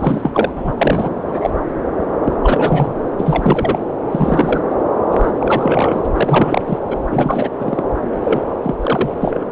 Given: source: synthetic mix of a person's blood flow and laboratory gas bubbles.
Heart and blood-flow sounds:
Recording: Doppler ultrasound of blood flow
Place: subclavian vein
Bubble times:
0.00-0.52 s: bubbles
0.56-0.72 s: bubbles
0.77-1.09 s: bubbles
1.28-1.50 s: bubbles
2.24-2.36 s: bubbles
2.44-2.95 s: bubbles
3.20-3.79 s: bubbles
4.11-4.60 s: bubbles
4.70-4.75 s: bubbles
5.11-5.32 s: bubbles
5.39-6.02 s: bubbles
6.04-6.07 s: bubbles
6.12-6.62 s: bubbles
6.67-6.78 s: bubbles
6.91-6.96 s: bubbles
7.09-7.50 s: bubbles
7.59-7.83 s: bubbles
8.24-8.40 s: bubbles
8.62-8.75 s: bubbles
8.80-9.10 s: bubbles
9.21-9.45 s: bubbles
From the record:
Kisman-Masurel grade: 343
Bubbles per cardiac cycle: rolling drumbeat, 9 or more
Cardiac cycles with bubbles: 100%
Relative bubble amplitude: loud (0.450 to 0.775)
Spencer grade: 3 (all of the cardiac periods contain showers or single bubble signals, but not dominating or overriding the cardiac motion signals)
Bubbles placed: anywhere in the cardiac cycle

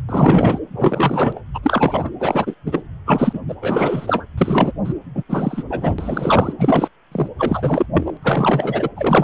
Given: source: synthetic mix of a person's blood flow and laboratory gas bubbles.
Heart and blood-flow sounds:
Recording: Doppler ultrasound of blood flow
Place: precordium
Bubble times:
0.08-0.58 s: bubbles
0.72-1.41 s: bubbles
1.54-1.59 s: bubbles
1.63-2.10 s: bubbles
2.20-2.55 s: bubbles
2.66-2.83 s: bubbles
3.06-3.40 s: bubbles
3.49-3.54 s: bubbles
3.62-4.25 s: bubbles
4.37-4.73 s: bubbles
4.84-4.93 s: bubbles
5.14-5.23 s: bubbles
5.29-5.63 s: bubbles
5.70-6.54 s: bubbles
6.58-6.88 s: bubbles
7.12-7.28 s: bubbles
7.38-7.86 s: bubbles
7.94-8.17 s: bubbles
8.22-8.88 s: bubbles
8.96-9.24 s: bubbles
From the record:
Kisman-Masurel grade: 333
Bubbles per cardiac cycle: rolling drumbeat, 9 or more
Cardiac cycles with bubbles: 50 to 99%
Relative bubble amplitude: loud (0.450 to 0.775)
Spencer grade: 3 (all of the cardiac periods contain showers or single bubble signals, but not dominating or overriding the cardiac motion signals)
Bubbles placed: anywhere in the cardiac cycle

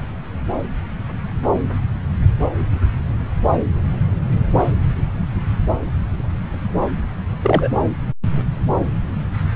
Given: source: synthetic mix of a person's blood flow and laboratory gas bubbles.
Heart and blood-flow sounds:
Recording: Doppler ultrasound of blood flow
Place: subclavian vein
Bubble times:
7.42-7.68 s: bubbles
From the record:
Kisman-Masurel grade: 112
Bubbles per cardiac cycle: 1 to 2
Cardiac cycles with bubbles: 1 to 10%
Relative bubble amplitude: moderate (0.250 to 0.450)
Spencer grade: 1 (occasional bubble signal discernible with the cardiac motion signal, with majority of cardiac periods free of bubbles)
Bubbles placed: anywhere in the cardiac cycle

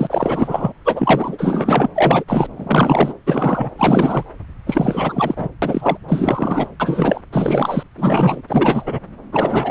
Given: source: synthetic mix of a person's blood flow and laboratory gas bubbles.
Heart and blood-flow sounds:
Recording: Doppler ultrasound of blood flow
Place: subclavian vein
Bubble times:
0.00-0.07 s: bubbles
0.10-0.73 s: bubbles
0.84-1.89 s: bubbles
1.95-2.24 s: bubbles
2.27-2.47 s: bubbles
2.56-3.13 s: bubbles
3.26-3.69 s: bubbles
3.77-4.24 s: bubbles
4.66-5.49 s: bubbles
5.62-5.97 s: bubbles
6.08-6.68 s: bubbles
6.79-7.21 s: bubbles
7.32-7.83 s: bubbles
7.97-8.42 s: bubbles
8.48-8.99 s: bubbles
9.32-9.71 s: bubbles
From the record:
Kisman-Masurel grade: 343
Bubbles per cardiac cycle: rolling drumbeat, 9 or more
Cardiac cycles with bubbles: 100%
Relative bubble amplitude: loud (0.450 to 0.775)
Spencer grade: 3 (all of the cardiac periods contain showers or single bubble signals, but not dominating or overriding the cardiac motion signals)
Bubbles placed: anywhere in the cardiac cycle

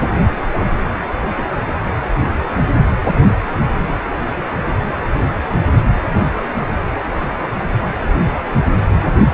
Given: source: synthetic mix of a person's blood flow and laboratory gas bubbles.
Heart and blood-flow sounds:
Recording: Doppler ultrasound of blood flow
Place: precordium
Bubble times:
0.53-0.67 s: bubbles
1.37-1.45 s: bubbles
3.19-3.30 s: bubbles
3.88-3.93 s: bubbles
From the record:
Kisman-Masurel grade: 122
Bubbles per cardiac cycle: 1 to 2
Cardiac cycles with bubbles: 10 to 50%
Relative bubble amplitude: moderate (0.250 to 0.450)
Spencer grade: 2 (many but less than half of the cardiac periods contain bubble signals, singularly or in groups)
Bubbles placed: anywhere in the cardiac cycle

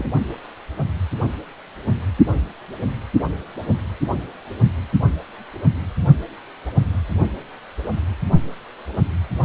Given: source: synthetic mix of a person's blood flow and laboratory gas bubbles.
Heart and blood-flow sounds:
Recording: Doppler ultrasound of blood flow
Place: precordium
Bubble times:
0.00-0.09 s: bubbles
From the record:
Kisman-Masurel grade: 211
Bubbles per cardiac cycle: several, 3 to 8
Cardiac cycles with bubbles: 1 to 10%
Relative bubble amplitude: barely perceptible (0.100 to 0.250)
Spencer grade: 1 (occasional bubble signal discernible with the cardiac motion signal, with majority of cardiac periods free of bubbles)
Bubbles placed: only in the low amplitude regions of the cardiac cycle

